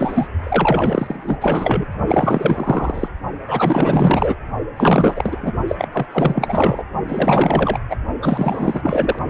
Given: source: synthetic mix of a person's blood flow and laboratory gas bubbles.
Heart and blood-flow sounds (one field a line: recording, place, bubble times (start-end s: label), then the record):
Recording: Doppler ultrasound of blood flow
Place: precordium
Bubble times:
0.00-0.27 s: bubbles
0.43-1.36 s: bubbles
1.41-1.85 s: bubbles
2.07-3.08 s: bubbles
3.46-4.36 s: bubbles
4.76-5.54 s: bubbles
5.68-5.76 s: bubbles
5.78-5.89 s: bubbles
5.92-6.06 s: bubbles
6.12-6.84 s: bubbles
7.08-7.79 s: bubbles
7.89-7.97 s: bubbles
8.22-9.19 s: bubbles
From the record:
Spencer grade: 4 (maximum detectable bubble signal sounding continuously throughout systole and diastole of every cardiac period, and overriding the amplitude of the normal cardiac signals)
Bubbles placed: only in the low amplitude regions of the cardiac cycle